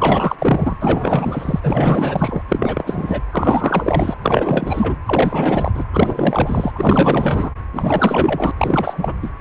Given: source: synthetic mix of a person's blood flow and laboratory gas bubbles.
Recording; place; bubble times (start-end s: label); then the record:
Doppler ultrasound of blood flow; precordium
0.00-0.36 s: bubbles
0.38-0.77 s: bubbles
0.80-2.42 s: bubbles
2.48-3.23 s: bubbles
3.31-4.15 s: bubbles
4.21-4.96 s: bubbles
5.06-5.71 s: bubbles
5.74-5.85 s: bubbles
5.93-6.72 s: bubbles
6.75-7.51 s: bubbles
7.73-8.51 s: bubbles
8.58-9.14 s: bubbles
9.22-9.30 s: bubbles
9.39-9.41 s: bubbles
From the record:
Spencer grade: 4 (maximum detectable bubble signal sounding continuously throughout systole and diastole of every cardiac period, and overriding the amplitude of the normal cardiac signals); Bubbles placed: anywhere in the cardiac cycle